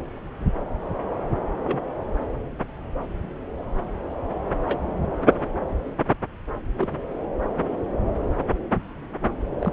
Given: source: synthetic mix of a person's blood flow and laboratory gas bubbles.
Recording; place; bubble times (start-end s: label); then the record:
Doppler ultrasound of blood flow; subclavian vein
1.64-1.78 s: bubbles
4.66-4.81 s: bubbles
6.79-7.00 s: bubbles
9.59-9.73 s: bubbles
From the record:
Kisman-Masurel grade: 121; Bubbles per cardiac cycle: 1 to 2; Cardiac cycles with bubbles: 10 to 50%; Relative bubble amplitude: barely perceptible (0.100 to 0.250); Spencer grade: 2 (many but less than half of the cardiac periods contain bubble signals, singularly or in groups); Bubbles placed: anywhere in the cardiac cycle